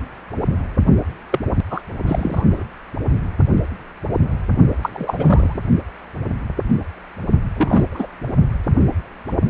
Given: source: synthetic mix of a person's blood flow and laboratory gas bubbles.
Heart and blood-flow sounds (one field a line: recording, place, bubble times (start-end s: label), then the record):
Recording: Doppler ultrasound of blood flow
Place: precordium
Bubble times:
1.30-1.40 s: bubbles
1.70-1.81 s: bubbles
2.06-2.63 s: bubbles
4.81-4.90 s: bubbles
4.93-5.59 s: bubbles
7.55-8.06 s: bubbles
From the record:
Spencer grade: 2 (many but less than half of the cardiac periods contain bubble signals, singularly or in groups)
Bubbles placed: only in the low amplitude regions of the cardiac cycle